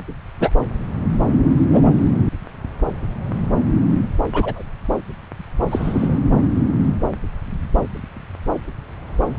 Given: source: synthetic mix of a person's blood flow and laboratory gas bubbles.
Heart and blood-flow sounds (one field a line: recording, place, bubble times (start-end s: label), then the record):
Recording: Doppler ultrasound of blood flow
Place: subclavian vein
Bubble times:
0.39-0.50 s: bubbles
1.72-1.92 s: bubbles
4.32-4.62 s: bubbles
5.70-6.18 s: bubbles
From the record:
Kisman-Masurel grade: 123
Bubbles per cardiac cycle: 1 to 2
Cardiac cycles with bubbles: 10 to 50%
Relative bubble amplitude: loud (0.450 to 0.775)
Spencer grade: 2 (many but less than half of the cardiac periods contain bubble signals, singularly or in groups)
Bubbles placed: anywhere in the cardiac cycle